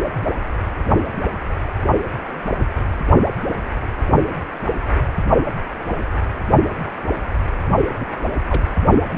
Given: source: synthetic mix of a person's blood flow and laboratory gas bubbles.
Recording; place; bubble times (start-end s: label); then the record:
Doppler ultrasound of blood flow; precordium
7.99-8.05 s: bubbles
8.49-8.62 s: bubbles
From the record:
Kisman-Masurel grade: 121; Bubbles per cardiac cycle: 1 to 2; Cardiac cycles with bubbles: 10 to 50%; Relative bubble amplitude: barely perceptible (0.100 to 0.250); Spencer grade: 2 (many but less than half of the cardiac periods contain bubble signals, singularly or in groups); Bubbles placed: only in the low amplitude regions of the cardiac cycle